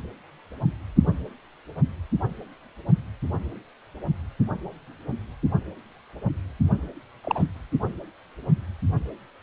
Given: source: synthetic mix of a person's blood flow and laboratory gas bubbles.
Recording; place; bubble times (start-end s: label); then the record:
Doppler ultrasound of blood flow; precordium
7.24-7.45 s: bubbles
From the record:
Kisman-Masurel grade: 122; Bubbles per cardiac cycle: 1 to 2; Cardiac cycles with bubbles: 10 to 50%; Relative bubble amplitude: moderate (0.250 to 0.450); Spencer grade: 2 (many but less than half of the cardiac periods contain bubble signals, singularly or in groups); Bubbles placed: only in the low amplitude regions of the cardiac cycle